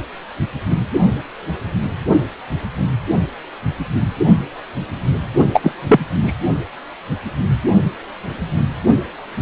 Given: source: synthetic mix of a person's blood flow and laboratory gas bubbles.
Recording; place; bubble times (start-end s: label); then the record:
Doppler ultrasound of blood flow; precordium
5.53-5.71 s: bubbles
5.88-6.00 s: bubbles
6.21-6.33 s: bubbles
From the record:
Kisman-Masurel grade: 213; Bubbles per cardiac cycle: several, 3 to 8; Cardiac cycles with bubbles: 1 to 10%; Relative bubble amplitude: loud (0.450 to 0.775); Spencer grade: 1 (occasional bubble signal discernible with the cardiac motion signal, with majority of cardiac periods free of bubbles); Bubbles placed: only in the low amplitude regions of the cardiac cycle